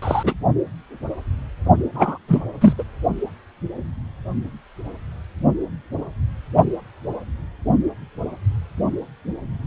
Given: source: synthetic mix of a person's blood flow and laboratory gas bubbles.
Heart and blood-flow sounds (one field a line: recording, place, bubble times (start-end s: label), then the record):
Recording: Doppler ultrasound of blood flow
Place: precordium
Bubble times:
0.02-0.33 s: bubbles
1.95-2.18 s: bubbles
2.28-2.42 s: bubbles
2.60-2.73 s: bubbles
2.78-2.83 s: bubbles
From the record:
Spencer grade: 2 (many but less than half of the cardiac periods contain bubble signals, singularly or in groups)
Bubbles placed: only in the low amplitude regions of the cardiac cycle